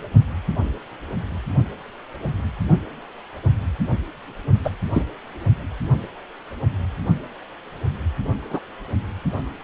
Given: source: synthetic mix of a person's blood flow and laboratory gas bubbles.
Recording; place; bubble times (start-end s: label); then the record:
Doppler ultrasound of blood flow; precordium
4.64-4.71 s: bubbles
4.92-5.02 s: bubbles
8.50-8.60 s: bubbles
From the record:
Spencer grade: 2 (many but less than half of the cardiac periods contain bubble signals, singularly or in groups); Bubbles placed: only in the low amplitude regions of the cardiac cycle